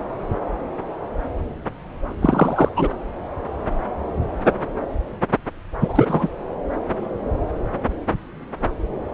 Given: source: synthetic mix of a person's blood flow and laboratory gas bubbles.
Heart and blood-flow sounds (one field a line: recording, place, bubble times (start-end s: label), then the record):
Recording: Doppler ultrasound of blood flow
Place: subclavian vein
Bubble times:
2.22-2.68 s: bubbles
2.76-2.89 s: bubbles
5.81-6.28 s: bubbles
From the record:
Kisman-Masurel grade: 223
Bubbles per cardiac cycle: several, 3 to 8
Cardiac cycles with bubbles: 10 to 50%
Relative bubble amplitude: loud (0.450 to 0.775)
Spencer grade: 2 (many but less than half of the cardiac periods contain bubble signals, singularly or in groups)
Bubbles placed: anywhere in the cardiac cycle